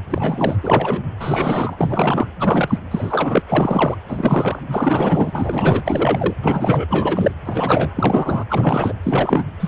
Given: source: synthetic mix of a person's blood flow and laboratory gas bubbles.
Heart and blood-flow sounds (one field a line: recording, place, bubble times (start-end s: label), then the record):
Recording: Doppler ultrasound of blood flow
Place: precordium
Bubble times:
0.10-0.56 s: bubbles
0.61-1.02 s: bubbles
1.20-2.27 s: bubbles
2.40-2.78 s: bubbles
2.91-3.42 s: bubbles
3.49-3.97 s: bubbles
4.08-4.59 s: bubbles
4.71-6.33 s: bubbles
6.42-6.86 s: bubbles
6.90-7.32 s: bubbles
7.45-7.90 s: bubbles
7.95-8.45 s: bubbles
8.48-8.94 s: bubbles
9.03-9.44 s: bubbles
9.60-9.68 s: bubbles
From the record:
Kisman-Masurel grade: 343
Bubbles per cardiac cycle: rolling drumbeat, 9 or more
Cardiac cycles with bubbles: 100%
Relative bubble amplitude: loud (0.450 to 0.775)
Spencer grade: 3 (all of the cardiac periods contain showers or single bubble signals, but not dominating or overriding the cardiac motion signals)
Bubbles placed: anywhere in the cardiac cycle